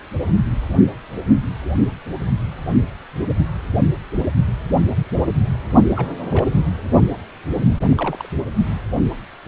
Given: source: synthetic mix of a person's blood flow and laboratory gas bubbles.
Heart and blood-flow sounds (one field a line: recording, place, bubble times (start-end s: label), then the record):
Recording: Doppler ultrasound of blood flow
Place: precordium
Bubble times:
5.96-6.08 s: bubbles
6.30-6.46 s: bubbles
7.89-8.29 s: bubbles
From the record:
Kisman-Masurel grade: 121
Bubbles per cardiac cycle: 1 to 2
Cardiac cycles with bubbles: 10 to 50%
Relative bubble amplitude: barely perceptible (0.100 to 0.250)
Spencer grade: 2 (many but less than half of the cardiac periods contain bubble signals, singularly or in groups)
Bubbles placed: only in the low amplitude regions of the cardiac cycle